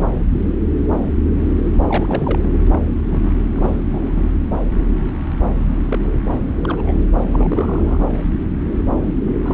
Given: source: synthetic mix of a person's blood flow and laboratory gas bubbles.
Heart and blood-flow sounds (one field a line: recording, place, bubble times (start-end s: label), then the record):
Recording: Doppler ultrasound of blood flow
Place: subclavian vein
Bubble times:
1.86-2.39 s: bubbles
2.42-2.54 s: bubbles
2.72-2.79 s: bubbles
3.10-3.33 s: bubbles
3.55-4.24 s: bubbles
5.86-5.99 s: bubbles
6.63-7.08 s: bubbles
7.29-7.98 s: bubbles
9.24-9.30 s: bubbles
9.43-9.54 s: bubbles
From the record:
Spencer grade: 3 (all of the cardiac periods contain showers or single bubble signals, but not dominating or overriding the cardiac motion signals)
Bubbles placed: anywhere in the cardiac cycle